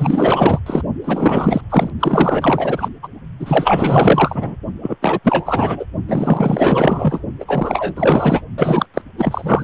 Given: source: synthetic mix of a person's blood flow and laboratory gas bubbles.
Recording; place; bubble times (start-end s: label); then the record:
Doppler ultrasound of blood flow; precordium
0.00-0.59 s: bubbles
0.66-0.82 s: bubbles
1.04-1.61 s: bubbles
1.70-1.90 s: bubbles
1.99-2.88 s: bubbles
3.03-3.08 s: bubbles
3.39-4.55 s: bubbles
4.83-4.96 s: bubbles
5.01-5.19 s: bubbles
5.23-5.85 s: bubbles
6.08-7.21 s: bubbles
7.39-7.44 s: bubbles
7.47-7.93 s: bubbles
7.96-8.42 s: bubbles
8.57-8.86 s: bubbles
8.94-9.02 s: bubbles
9.17-9.64 s: bubbles
From the record:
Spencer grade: 4 (maximum detectable bubble signal sounding continuously throughout systole and diastole of every cardiac period, and overriding the amplitude of the normal cardiac signals); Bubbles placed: only in the low amplitude regions of the cardiac cycle